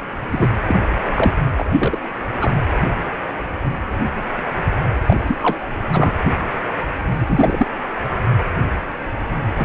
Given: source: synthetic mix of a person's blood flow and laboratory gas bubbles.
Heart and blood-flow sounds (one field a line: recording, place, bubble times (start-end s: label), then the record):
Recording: Doppler ultrasound of blood flow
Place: precordium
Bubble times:
0.30-0.49 s: bubbles
0.68-0.78 s: bubbles
1.04-1.36 s: bubbles
1.57-1.98 s: bubbles
2.40-2.51 s: bubbles
5.06-5.21 s: bubbles
5.27-5.72 s: bubbles
5.93-6.12 s: bubbles
7.15-7.67 s: bubbles
9.58-9.65 s: bubbles
From the record:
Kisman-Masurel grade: 233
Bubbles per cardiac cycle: several, 3 to 8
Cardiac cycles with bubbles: 50 to 99%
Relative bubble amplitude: loud (0.450 to 0.775)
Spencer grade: 3 (all of the cardiac periods contain showers or single bubble signals, but not dominating or overriding the cardiac motion signals)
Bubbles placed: anywhere in the cardiac cycle